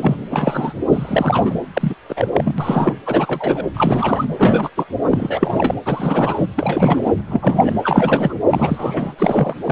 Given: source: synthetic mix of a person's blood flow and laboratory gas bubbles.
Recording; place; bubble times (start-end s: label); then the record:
Doppler ultrasound of blood flow; precordium
0.00-0.23 s: bubbles
0.30-0.73 s: bubbles
0.92-1.59 s: bubbles
1.73-1.94 s: bubbles
2.09-2.29 s: bubbles
2.32-2.54 s: bubbles
2.58-2.94 s: bubbles
3.06-3.65 s: bubbles
3.73-4.25 s: bubbles
4.38-4.70 s: bubbles
4.75-4.85 s: bubbles
5.11-5.75 s: bubbles
5.85-6.47 s: bubbles
6.56-7.11 s: bubbles
7.17-7.21 s: bubbles
7.28-7.75 s: bubbles
7.83-8.34 s: bubbles
8.49-9.14 s: bubbles
9.19-9.54 s: bubbles
9.62-9.72 s: bubbles
From the record:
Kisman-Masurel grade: 343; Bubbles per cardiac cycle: rolling drumbeat, 9 or more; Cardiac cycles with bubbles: 100%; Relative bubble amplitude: loud (0.450 to 0.775); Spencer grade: 3 (all of the cardiac periods contain showers or single bubble signals, but not dominating or overriding the cardiac motion signals); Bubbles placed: anywhere in the cardiac cycle